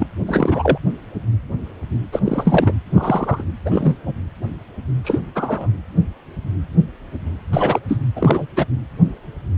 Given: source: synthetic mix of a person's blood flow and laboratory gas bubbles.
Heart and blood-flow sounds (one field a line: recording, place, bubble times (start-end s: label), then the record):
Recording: Doppler ultrasound of blood flow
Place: precordium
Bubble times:
0.00-0.07 s: bubbles
0.27-0.78 s: bubbles
2.12-2.20 s: bubbles
2.25-2.73 s: bubbles
2.92-3.44 s: bubbles
3.65-3.98 s: bubbles
4.06-4.14 s: bubbles
5.04-5.20 s: bubbles
5.35-5.67 s: bubbles
7.53-7.79 s: bubbles
7.88-7.97 s: bubbles
8.16-8.46 s: bubbles
8.56-8.66 s: bubbles
From the record:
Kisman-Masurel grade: 233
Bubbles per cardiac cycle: several, 3 to 8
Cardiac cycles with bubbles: 50 to 99%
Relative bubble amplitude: loud (0.450 to 0.775)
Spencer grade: 3 (all of the cardiac periods contain showers or single bubble signals, but not dominating or overriding the cardiac motion signals)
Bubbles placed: anywhere in the cardiac cycle